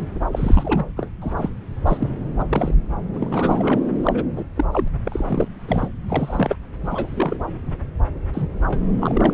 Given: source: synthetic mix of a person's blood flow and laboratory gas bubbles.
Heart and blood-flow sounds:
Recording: Doppler ultrasound of blood flow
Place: subclavian vein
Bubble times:
0.32-0.86 s: bubbles
0.96-1.10 s: bubbles
1.21-1.50 s: bubbles
1.86-2.09 s: bubbles
2.39-2.44 s: bubbles
2.49-2.74 s: bubbles
3.14-3.80 s: bubbles
4.03-4.23 s: bubbles
4.35-4.45 s: bubbles
4.56-4.65 s: bubbles
4.71-4.88 s: bubbles
5.04-5.48 s: bubbles
5.68-5.88 s: bubbles
6.03-6.56 s: bubbles
6.83-7.38 s: bubbles
8.33-8.46 s: bubbles
8.67-8.85 s: bubbles
9.01-9.34 s: bubbles
From the record:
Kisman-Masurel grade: 242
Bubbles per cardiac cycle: several, 3 to 8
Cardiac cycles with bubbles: 100%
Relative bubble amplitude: moderate (0.250 to 0.450)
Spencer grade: 3 (all of the cardiac periods contain showers or single bubble signals, but not dominating or overriding the cardiac motion signals)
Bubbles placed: anywhere in the cardiac cycle

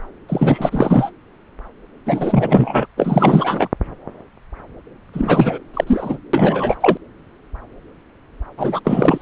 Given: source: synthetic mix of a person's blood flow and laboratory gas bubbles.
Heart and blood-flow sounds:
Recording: Doppler ultrasound of blood flow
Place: subclavian vein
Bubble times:
0.28-1.10 s: bubbles
2.06-2.87 s: bubbles
2.96-3.68 s: bubbles
5.13-5.58 s: bubbles
5.74-5.84 s: bubbles
5.87-6.17 s: bubbles
6.33-6.77 s: bubbles
6.80-6.97 s: bubbles
8.57-8.80 s: bubbles
8.85-9.22 s: bubbles
From the record:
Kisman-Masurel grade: 333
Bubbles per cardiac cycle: rolling drumbeat, 9 or more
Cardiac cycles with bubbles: 50 to 99%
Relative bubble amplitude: loud (0.450 to 0.775)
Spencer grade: 3 (all of the cardiac periods contain showers or single bubble signals, but not dominating or overriding the cardiac motion signals)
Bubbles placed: anywhere in the cardiac cycle

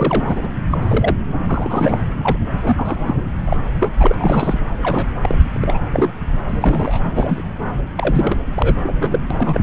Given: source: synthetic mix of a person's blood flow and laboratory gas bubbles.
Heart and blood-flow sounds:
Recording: Doppler ultrasound of blood flow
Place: subclavian vein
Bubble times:
0.00-0.48 s: bubbles
0.70-1.14 s: bubbles
1.47-2.02 s: bubbles
2.25-2.37 s: bubbles
2.58-3.21 s: bubbles
3.45-3.56 s: bubbles
3.79-3.90 s: bubbles
4.00-4.14 s: bubbles
4.19-4.59 s: bubbles
4.82-5.07 s: bubbles
5.21-5.38 s: bubbles
5.49-5.82 s: bubbles
5.91-6.10 s: bubbles
6.48-7.00 s: bubbles
7.15-7.42 s: bubbles
7.95-8.38 s: bubbles
8.54-8.77 s: bubbles
8.83-9.20 s: bubbles
9.30-9.61 s: bubbles
From the record:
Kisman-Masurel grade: 242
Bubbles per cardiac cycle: several, 3 to 8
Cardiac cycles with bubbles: 100%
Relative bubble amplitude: moderate (0.250 to 0.450)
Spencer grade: 3 (all of the cardiac periods contain showers or single bubble signals, but not dominating or overriding the cardiac motion signals)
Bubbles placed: anywhere in the cardiac cycle

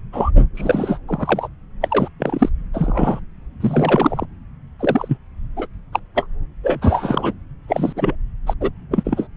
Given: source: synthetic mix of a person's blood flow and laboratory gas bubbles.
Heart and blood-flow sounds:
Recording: Doppler ultrasound of blood flow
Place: subclavian vein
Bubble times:
0.12-0.30 s: bubbles
0.35-0.41 s: bubbles
0.55-0.99 s: bubbles
1.07-1.48 s: bubbles
1.81-2.08 s: bubbles
2.19-2.50 s: bubbles
2.73-3.20 s: bubbles
3.60-4.25 s: bubbles
4.79-5.17 s: bubbles
5.56-5.66 s: bubbles
5.92-6.00 s: bubbles
6.14-6.26 s: bubbles
6.63-7.33 s: bubbles
7.67-7.92 s: bubbles
7.95-8.15 s: bubbles
8.46-8.54 s: bubbles
8.60-8.71 s: bubbles
8.91-9.27 s: bubbles
From the record:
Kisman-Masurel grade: 243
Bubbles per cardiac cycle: several, 3 to 8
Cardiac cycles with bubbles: 100%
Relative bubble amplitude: loud (0.450 to 0.775)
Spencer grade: 3 (all of the cardiac periods contain showers or single bubble signals, but not dominating or overriding the cardiac motion signals)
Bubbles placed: anywhere in the cardiac cycle

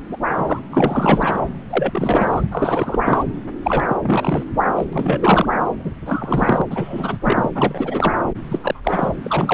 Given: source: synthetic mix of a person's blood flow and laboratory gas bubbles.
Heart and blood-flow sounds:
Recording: Doppler ultrasound of blood flow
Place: subclavian vein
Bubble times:
0.09-0.17 s: bubbles
0.30-0.59 s: bubbles
0.70-1.40 s: bubbles
1.69-2.42 s: bubbles
2.51-2.98 s: bubbles
3.05-3.24 s: bubbles
3.62-3.97 s: bubbles
4.02-4.44 s: bubbles
4.75-4.85 s: bubbles
4.93-5.47 s: bubbles
5.72-5.92 s: bubbles
6.06-6.62 s: bubbles
6.70-7.18 s: bubbles
7.23-7.50 s: bubbles
7.54-8.15 s: bubbles
8.50-8.80 s: bubbles
8.83-9.08 s: bubbles
9.22-9.54 s: bubbles
From the record:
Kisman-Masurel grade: 343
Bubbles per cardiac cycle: rolling drumbeat, 9 or more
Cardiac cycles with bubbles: 100%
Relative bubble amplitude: loud (0.450 to 0.775)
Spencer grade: 3 (all of the cardiac periods contain showers or single bubble signals, but not dominating or overriding the cardiac motion signals)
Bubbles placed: anywhere in the cardiac cycle

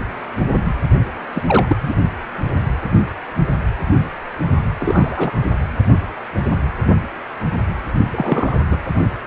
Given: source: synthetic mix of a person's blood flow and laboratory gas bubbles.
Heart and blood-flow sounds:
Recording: Doppler ultrasound of blood flow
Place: precordium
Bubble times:
1.32-1.43 s: bubbles
1.46-1.77 s: bubbles
1.80-1.95 s: bubbles
4.79-5.31 s: bubbles
8.12-8.58 s: bubbles
8.70-8.79 s: bubbles
From the record:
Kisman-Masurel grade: 222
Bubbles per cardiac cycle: several, 3 to 8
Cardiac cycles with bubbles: 10 to 50%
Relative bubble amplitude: moderate (0.250 to 0.450)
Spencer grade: 2 (many but less than half of the cardiac periods contain bubble signals, singularly or in groups)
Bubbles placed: only in the low amplitude regions of the cardiac cycle

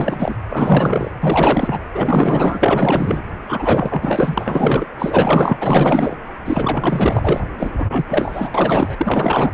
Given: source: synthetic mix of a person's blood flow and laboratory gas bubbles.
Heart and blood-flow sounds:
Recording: Doppler ultrasound of blood flow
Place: precordium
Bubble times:
0.00-0.35 s: bubbles
0.49-1.11 s: bubbles
1.21-1.79 s: bubbles
1.94-3.23 s: bubbles
3.48-4.86 s: bubbles
4.99-6.17 s: bubbles
6.45-7.44 s: bubbles
7.57-7.71 s: bubbles
7.77-8.05 s: bubbles
8.09-8.50 s: bubbles
8.54-9.51 s: bubbles
From the record:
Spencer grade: 4 (maximum detectable bubble signal sounding continuously throughout systole and diastole of every cardiac period, and overriding the amplitude of the normal cardiac signals)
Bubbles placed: anywhere in the cardiac cycle

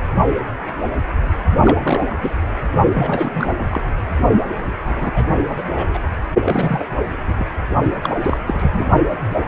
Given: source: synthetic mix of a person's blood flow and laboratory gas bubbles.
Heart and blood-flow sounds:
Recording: Doppler ultrasound of blood flow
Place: precordium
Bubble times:
1.63-2.05 s: bubbles
2.09-2.15 s: bubbles
2.21-2.31 s: bubbles
2.94-3.55 s: bubbles
3.70-3.81 s: bubbles
4.84-5.27 s: bubbles
5.37-5.63 s: bubbles
5.68-5.98 s: bubbles
6.42-6.87 s: bubbles
7.25-7.33 s: bubbles
7.38-7.46 s: bubbles
8.03-8.20 s: bubbles
8.22-8.38 s: bubbles
8.46-8.87 s: bubbles
From the record:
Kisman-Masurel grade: 332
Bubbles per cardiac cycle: rolling drumbeat, 9 or more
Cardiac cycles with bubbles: 50 to 99%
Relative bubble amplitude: moderate (0.250 to 0.450)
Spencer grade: 3 (all of the cardiac periods contain showers or single bubble signals, but not dominating or overriding the cardiac motion signals)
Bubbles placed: only in the low amplitude regions of the cardiac cycle

